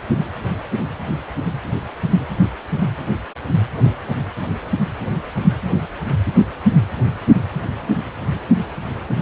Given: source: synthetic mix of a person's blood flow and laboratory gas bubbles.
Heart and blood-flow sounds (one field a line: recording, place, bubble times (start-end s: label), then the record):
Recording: Doppler ultrasound of blood flow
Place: precordium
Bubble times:
no bubbles
From the record:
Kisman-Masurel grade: 000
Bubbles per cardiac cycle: 0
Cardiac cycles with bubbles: 0%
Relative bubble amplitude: no bubbles discernible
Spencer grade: 0 (complete lack of bubble signals)